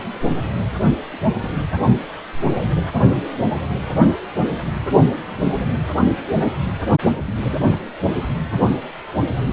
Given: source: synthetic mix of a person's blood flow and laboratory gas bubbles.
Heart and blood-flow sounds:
Doppler ultrasound of blood flow; precordium
1.42-1.50 s: bubbles
6.41-6.50 s: bubbles
7.22-7.71 s: bubbles
From the record:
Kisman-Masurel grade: 121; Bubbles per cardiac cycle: 1 to 2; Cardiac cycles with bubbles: 10 to 50%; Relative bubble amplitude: barely perceptible (0.100 to 0.250); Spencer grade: 2 (many but less than half of the cardiac periods contain bubble signals, singularly or in groups); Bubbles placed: only in the low amplitude regions of the cardiac cycle

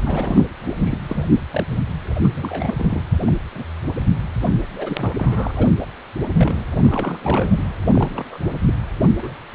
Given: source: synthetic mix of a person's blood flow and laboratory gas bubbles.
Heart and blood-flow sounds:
Doppler ultrasound of blood flow; precordium
0.00-0.44 s: bubbles
0.64-1.00 s: bubbles
1.09-1.24 s: bubbles
1.51-1.64 s: bubbles
2.23-3.02 s: bubbles
3.20-3.37 s: bubbles
3.54-3.64 s: bubbles
4.00-4.05 s: bubbles
4.42-4.49 s: bubbles
4.75-5.12 s: bubbles
5.18-5.71 s: bubbles
5.79-5.88 s: bubbles
6.33-6.65 s: bubbles
6.78-7.63 s: bubbles
7.85-8.39 s: bubbles
8.54-8.73 s: bubbles
9.22-9.36 s: bubbles
9.53-9.55 s: bubbles
From the record:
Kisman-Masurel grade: 242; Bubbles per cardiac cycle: several, 3 to 8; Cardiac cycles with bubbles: 100%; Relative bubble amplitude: moderate (0.250 to 0.450); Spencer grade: 3 (all of the cardiac periods contain showers or single bubble signals, but not dominating or overriding the cardiac motion signals); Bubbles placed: anywhere in the cardiac cycle

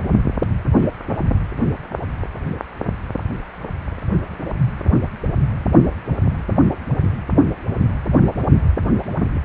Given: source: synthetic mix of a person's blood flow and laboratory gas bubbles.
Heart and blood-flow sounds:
Doppler ultrasound of blood flow; precordium
0.80-0.88 s: bubbles
From the record:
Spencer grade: 1 (occasional bubble signal discernible with the cardiac motion signal, with majority of cardiac periods free of bubbles); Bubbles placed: only in the low amplitude regions of the cardiac cycle

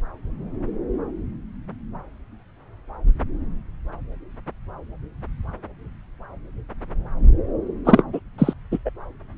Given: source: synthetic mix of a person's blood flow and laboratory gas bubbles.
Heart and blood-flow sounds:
Doppler ultrasound of blood flow; subclavian vein
7.85-8.03 s: bubbles
8.12-8.20 s: bubbles
8.38-8.54 s: bubbles
8.71-8.79 s: bubbles
8.85-8.90 s: bubbles
From the record:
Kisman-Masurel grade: 213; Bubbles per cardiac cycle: several, 3 to 8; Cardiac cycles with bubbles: 1 to 10%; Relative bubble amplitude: loud (0.450 to 0.775); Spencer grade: 1 (occasional bubble signal discernible with the cardiac motion signal, with majority of cardiac periods free of bubbles); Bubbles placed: anywhere in the cardiac cycle

